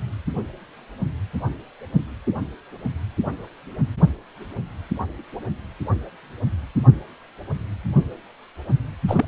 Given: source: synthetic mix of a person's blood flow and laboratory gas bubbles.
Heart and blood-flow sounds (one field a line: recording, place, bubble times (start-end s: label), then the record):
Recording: Doppler ultrasound of blood flow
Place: precordium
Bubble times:
9.07-9.25 s: bubbles
From the record:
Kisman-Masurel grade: 212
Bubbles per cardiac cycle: several, 3 to 8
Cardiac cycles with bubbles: 1 to 10%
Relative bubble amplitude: moderate (0.250 to 0.450)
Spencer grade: 1 (occasional bubble signal discernible with the cardiac motion signal, with majority of cardiac periods free of bubbles)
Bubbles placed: anywhere in the cardiac cycle